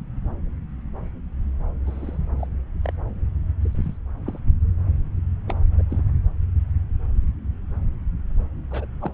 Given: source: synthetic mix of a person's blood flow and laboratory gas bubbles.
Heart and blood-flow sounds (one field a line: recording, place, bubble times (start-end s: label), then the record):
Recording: Doppler ultrasound of blood flow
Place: subclavian vein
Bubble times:
1.86-2.18 s: bubbles
2.38-2.47 s: bubbles
2.82-2.92 s: bubbles
3.65-3.96 s: bubbles
4.25-4.39 s: bubbles
5.48-5.55 s: bubbles
5.78-5.82 s: bubbles
5.90-6.03 s: bubbles
8.71-8.86 s: bubbles
9.01-9.12 s: bubbles
From the record:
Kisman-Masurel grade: 121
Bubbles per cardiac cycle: 1 to 2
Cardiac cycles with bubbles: 10 to 50%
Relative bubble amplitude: barely perceptible (0.100 to 0.250)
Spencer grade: 2 (many but less than half of the cardiac periods contain bubble signals, singularly or in groups)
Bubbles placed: anywhere in the cardiac cycle